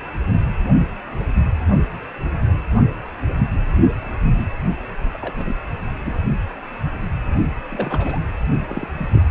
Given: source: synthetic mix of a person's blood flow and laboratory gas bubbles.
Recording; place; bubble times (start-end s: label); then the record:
Doppler ultrasound of blood flow; precordium
5.13-5.18 s: bubbles
5.21-5.33 s: bubbles
5.35-5.55 s: bubbles
6.05-6.22 s: bubbles
7.72-8.19 s: bubbles
8.68-8.88 s: bubbles
8.97-9.10 s: bubbles
9.12-9.22 s: bubbles
From the record:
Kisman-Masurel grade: 221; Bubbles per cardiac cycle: several, 3 to 8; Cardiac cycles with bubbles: 10 to 50%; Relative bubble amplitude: barely perceptible (0.100 to 0.250); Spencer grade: 2 (many but less than half of the cardiac periods contain bubble signals, singularly or in groups); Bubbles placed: only in the low amplitude regions of the cardiac cycle